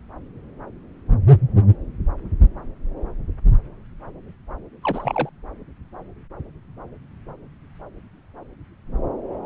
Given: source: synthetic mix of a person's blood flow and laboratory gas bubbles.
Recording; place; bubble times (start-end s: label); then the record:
Doppler ultrasound of blood flow; subclavian vein
4.83-5.29 s: bubbles
From the record:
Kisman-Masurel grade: 212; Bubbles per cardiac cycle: several, 3 to 8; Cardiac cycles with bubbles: 1 to 10%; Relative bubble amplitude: moderate (0.250 to 0.450); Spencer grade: 1 (occasional bubble signal discernible with the cardiac motion signal, with majority of cardiac periods free of bubbles); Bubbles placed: anywhere in the cardiac cycle